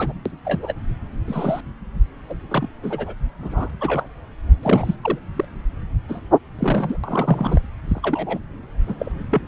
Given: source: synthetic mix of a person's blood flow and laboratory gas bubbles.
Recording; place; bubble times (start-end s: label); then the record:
Doppler ultrasound of blood flow; subclavian vein
0.00-0.13 s: bubbles
0.26-0.31 s: bubbles
0.45-0.73 s: bubbles
1.27-1.61 s: bubbles
2.29-2.35 s: bubbles
2.48-2.69 s: bubbles
2.83-3.14 s: bubbles
3.42-3.70 s: bubbles
3.81-4.06 s: bubbles
4.62-4.95 s: bubbles
5.02-5.19 s: bubbles
5.36-5.45 s: bubbles
6.09-6.21 s: bubbles
6.59-6.97 s: bubbles
7.04-7.61 s: bubbles
7.88-8.39 s: bubbles
8.87-8.95 s: bubbles
8.98-9.12 s: bubbles
9.31-9.41 s: bubbles
From the record:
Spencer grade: 3 (all of the cardiac periods contain showers or single bubble signals, but not dominating or overriding the cardiac motion signals); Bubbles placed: anywhere in the cardiac cycle